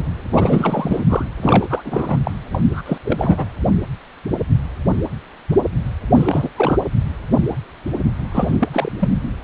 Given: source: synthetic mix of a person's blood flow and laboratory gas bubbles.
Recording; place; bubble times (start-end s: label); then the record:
Doppler ultrasound of blood flow; precordium
0.31-1.03 s: bubbles
1.08-1.25 s: bubbles
1.42-2.17 s: bubbles
2.23-2.31 s: bubbles
2.51-2.81 s: bubbles
2.85-2.98 s: bubbles
3.04-3.46 s: bubbles
6.14-6.49 s: bubbles
6.56-6.78 s: bubbles
8.31-8.68 s: bubbles
8.73-9.08 s: bubbles
From the record:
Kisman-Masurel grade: 332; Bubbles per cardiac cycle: rolling drumbeat, 9 or more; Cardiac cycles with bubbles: 50 to 99%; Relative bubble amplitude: moderate (0.250 to 0.450); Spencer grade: 3 (all of the cardiac periods contain showers or single bubble signals, but not dominating or overriding the cardiac motion signals); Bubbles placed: anywhere in the cardiac cycle